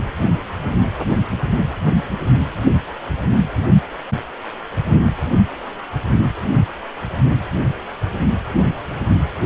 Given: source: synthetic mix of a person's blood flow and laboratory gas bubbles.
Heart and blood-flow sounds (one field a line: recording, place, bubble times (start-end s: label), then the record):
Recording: Doppler ultrasound of blood flow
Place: precordium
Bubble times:
no bubbles
From the record:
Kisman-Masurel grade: 000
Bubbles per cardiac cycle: 0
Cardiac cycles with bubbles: 0%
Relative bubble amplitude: no bubbles discernible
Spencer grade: 0 (complete lack of bubble signals)